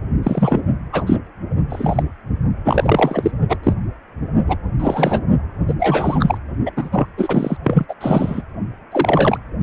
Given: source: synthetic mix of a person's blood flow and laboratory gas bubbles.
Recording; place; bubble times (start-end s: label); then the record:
Doppler ultrasound of blood flow; precordium
0.23-0.60 s: bubbles
0.92-1.04 s: bubbles
1.06-1.16 s: bubbles
1.69-2.03 s: bubbles
2.64-3.31 s: bubbles
3.49-3.57 s: bubbles
3.63-3.74 s: bubbles
4.46-4.56 s: bubbles
4.79-5.19 s: bubbles
5.67-5.75 s: bubbles
5.79-6.38 s: bubbles
6.65-6.71 s: bubbles
6.76-7.07 s: bubbles
7.17-7.57 s: bubbles
7.63-7.85 s: bubbles
7.88-7.94 s: bubbles
8.01-8.42 s: bubbles
8.91-9.38 s: bubbles
From the record:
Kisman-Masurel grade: 243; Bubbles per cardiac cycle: several, 3 to 8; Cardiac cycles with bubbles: 100%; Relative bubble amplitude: loud (0.450 to 0.775); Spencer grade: 3 (all of the cardiac periods contain showers or single bubble signals, but not dominating or overriding the cardiac motion signals); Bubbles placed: only in the low amplitude regions of the cardiac cycle